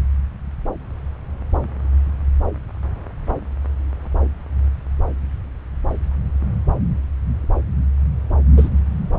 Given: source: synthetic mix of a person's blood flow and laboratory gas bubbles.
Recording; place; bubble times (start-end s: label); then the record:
Doppler ultrasound of blood flow; subclavian vein
8.56-8.70 s: bubbles
From the record:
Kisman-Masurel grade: 112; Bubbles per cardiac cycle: 1 to 2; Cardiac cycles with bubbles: 1 to 10%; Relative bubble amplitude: moderate (0.250 to 0.450); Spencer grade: 1 (occasional bubble signal discernible with the cardiac motion signal, with majority of cardiac periods free of bubbles); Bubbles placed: anywhere in the cardiac cycle